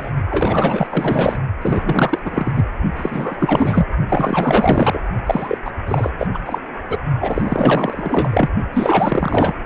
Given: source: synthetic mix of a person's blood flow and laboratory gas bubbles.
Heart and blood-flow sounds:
Doppler ultrasound of blood flow; precordium
0.00-0.10 s: bubbles
0.30-1.36 s: bubbles
1.61-2.19 s: bubbles
2.24-2.63 s: bubbles
2.96-3.36 s: bubbles
3.39-3.85 s: bubbles
4.08-5.01 s: bubbles
5.26-5.58 s: bubbles
5.65-5.72 s: bubbles
5.86-6.10 s: bubbles
6.18-6.27 s: bubbles
6.33-6.39 s: bubbles
6.46-6.58 s: bubbles
6.90-6.98 s: bubbles
7.21-8.50 s: bubbles
8.73-9.54 s: bubbles
From the record:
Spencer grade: 4 (maximum detectable bubble signal sounding continuously throughout systole and diastole of every cardiac period, and overriding the amplitude of the normal cardiac signals); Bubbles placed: only in the low amplitude regions of the cardiac cycle

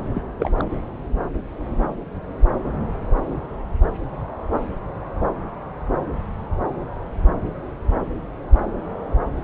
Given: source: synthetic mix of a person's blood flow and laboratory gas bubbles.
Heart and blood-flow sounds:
Doppler ultrasound of blood flow; subclavian vein
0.14-0.23 s: bubbles
0.39-0.50 s: bubbles
0.55-0.64 s: bubbles
From the record:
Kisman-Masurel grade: 211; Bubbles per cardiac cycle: several, 3 to 8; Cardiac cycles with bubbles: 1 to 10%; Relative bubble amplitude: barely perceptible (0.100 to 0.250); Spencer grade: 1 (occasional bubble signal discernible with the cardiac motion signal, with majority of cardiac periods free of bubbles); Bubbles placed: anywhere in the cardiac cycle

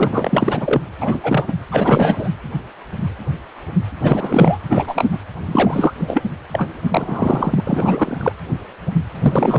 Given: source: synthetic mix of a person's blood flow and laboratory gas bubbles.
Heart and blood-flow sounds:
Doppler ultrasound of blood flow; precordium
0.00-0.81 s: bubbles
0.98-1.20 s: bubbles
1.23-1.53 s: bubbles
1.72-2.29 s: bubbles
4.00-4.58 s: bubbles
4.69-5.08 s: bubbles
5.11-5.19 s: bubbles
5.46-5.92 s: bubbles
6.00-6.24 s: bubbles
6.52-6.71 s: bubbles
6.83-7.62 s: bubbles
7.67-8.32 s: bubbles
9.21-9.58 s: bubbles
From the record:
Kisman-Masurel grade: 333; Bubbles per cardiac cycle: rolling drumbeat, 9 or more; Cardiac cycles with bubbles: 50 to 99%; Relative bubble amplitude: loud (0.450 to 0.775); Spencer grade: 3 (all of the cardiac periods contain showers or single bubble signals, but not dominating or overriding the cardiac motion signals); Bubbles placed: anywhere in the cardiac cycle

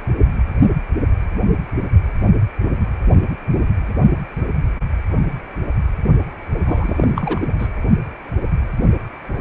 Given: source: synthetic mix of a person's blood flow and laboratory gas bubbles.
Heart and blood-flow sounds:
Doppler ultrasound of blood flow; precordium
6.65-7.51 s: bubbles
7.58-7.68 s: bubbles
From the record:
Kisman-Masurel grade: 212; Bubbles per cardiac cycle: several, 3 to 8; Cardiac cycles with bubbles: 1 to 10%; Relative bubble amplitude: moderate (0.250 to 0.450); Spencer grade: 1 (occasional bubble signal discernible with the cardiac motion signal, with majority of cardiac periods free of bubbles); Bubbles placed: only in the low amplitude regions of the cardiac cycle

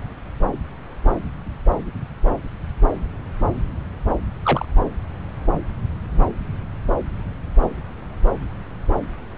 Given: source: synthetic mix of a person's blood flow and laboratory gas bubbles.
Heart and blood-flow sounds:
Doppler ultrasound of blood flow; subclavian vein
4.43-4.65 s: bubbles
From the record:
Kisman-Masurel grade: 112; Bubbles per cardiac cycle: 1 to 2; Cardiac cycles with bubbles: 1 to 10%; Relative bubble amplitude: moderate (0.250 to 0.450); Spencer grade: 1 (occasional bubble signal discernible with the cardiac motion signal, with majority of cardiac periods free of bubbles); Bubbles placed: anywhere in the cardiac cycle

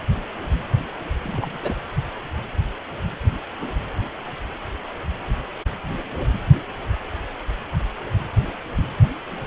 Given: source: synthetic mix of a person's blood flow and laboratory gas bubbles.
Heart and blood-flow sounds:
Doppler ultrasound of blood flow; precordium
1.23-1.75 s: bubbles
From the record:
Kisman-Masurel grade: 221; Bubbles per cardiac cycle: several, 3 to 8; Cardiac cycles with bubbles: 10 to 50%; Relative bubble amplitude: barely perceptible (0.100 to 0.250); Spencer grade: 2 (many but less than half of the cardiac periods contain bubble signals, singularly or in groups); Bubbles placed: anywhere in the cardiac cycle

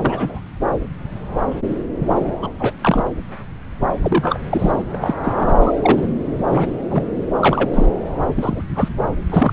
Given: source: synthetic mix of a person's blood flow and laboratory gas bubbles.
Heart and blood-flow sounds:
Doppler ultrasound of blood flow; subclavian vein
0.00-0.41 s: bubbles
2.42-2.50 s: bubbles
2.59-2.71 s: bubbles
2.82-3.09 s: bubbles
4.02-4.41 s: bubbles
4.51-4.83 s: bubbles
4.94-4.98 s: bubbles
5.02-5.14 s: bubbles
5.23-5.55 s: bubbles
5.61-5.72 s: bubbles
5.82-6.07 s: bubbles
6.50-6.72 s: bubbles
6.91-7.04 s: bubbles
7.41-7.70 s: bubbles
7.73-7.86 s: bubbles
8.35-8.62 s: bubbles
8.75-8.88 s: bubbles
9.21-9.53 s: bubbles
From the record:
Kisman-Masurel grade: 232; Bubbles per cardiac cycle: several, 3 to 8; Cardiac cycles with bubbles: 50 to 99%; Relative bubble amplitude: moderate (0.250 to 0.450); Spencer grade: 3 (all of the cardiac periods contain showers or single bubble signals, but not dominating or overriding the cardiac motion signals); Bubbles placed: anywhere in the cardiac cycle

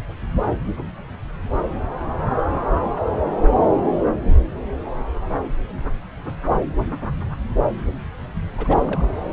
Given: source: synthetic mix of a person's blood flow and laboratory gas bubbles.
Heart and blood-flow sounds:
Doppler ultrasound of blood flow; subclavian vein
8.57-9.09 s: bubbles
From the record:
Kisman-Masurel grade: 211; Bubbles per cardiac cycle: several, 3 to 8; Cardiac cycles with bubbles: 1 to 10%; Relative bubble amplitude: barely perceptible (0.100 to 0.250); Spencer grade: 1 (occasional bubble signal discernible with the cardiac motion signal, with majority of cardiac periods free of bubbles); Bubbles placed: anywhere in the cardiac cycle

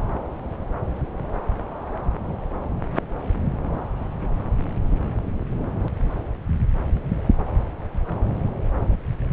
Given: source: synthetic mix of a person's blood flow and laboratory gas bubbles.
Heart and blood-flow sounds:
Doppler ultrasound of blood flow; subclavian vein
no bubbles
From the record:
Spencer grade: 0 (complete lack of bubble signals)

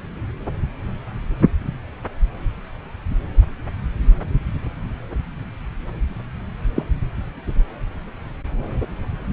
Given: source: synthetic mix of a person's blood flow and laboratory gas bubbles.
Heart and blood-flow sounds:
Doppler ultrasound of blood flow; subclavian vein
6.75-6.84 s: bubbles
From the record:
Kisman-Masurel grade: 122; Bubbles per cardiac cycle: 1 to 2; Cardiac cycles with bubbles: 10 to 50%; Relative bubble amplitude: moderate (0.250 to 0.450); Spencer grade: 2 (many but less than half of the cardiac periods contain bubble signals, singularly or in groups); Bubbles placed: anywhere in the cardiac cycle

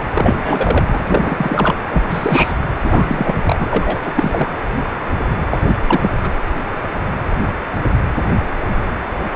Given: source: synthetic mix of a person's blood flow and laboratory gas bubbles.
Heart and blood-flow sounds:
Doppler ultrasound of blood flow; precordium
0.15-0.84 s: bubbles
0.92-1.75 s: bubbles
1.89-2.04 s: bubbles
2.09-2.54 s: bubbles
2.83-3.37 s: bubbles
3.46-3.98 s: bubbles
4.04-4.12 s: bubbles
4.16-4.50 s: bubbles
5.51-5.76 s: bubbles
5.87-6.09 s: bubbles
6.22-6.31 s: bubbles
From the record:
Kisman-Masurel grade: 333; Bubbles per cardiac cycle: rolling drumbeat, 9 or more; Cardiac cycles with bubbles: 50 to 99%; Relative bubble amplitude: loud (0.450 to 0.775); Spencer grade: 3 (all of the cardiac periods contain showers or single bubble signals, but not dominating or overriding the cardiac motion signals); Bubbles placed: anywhere in the cardiac cycle

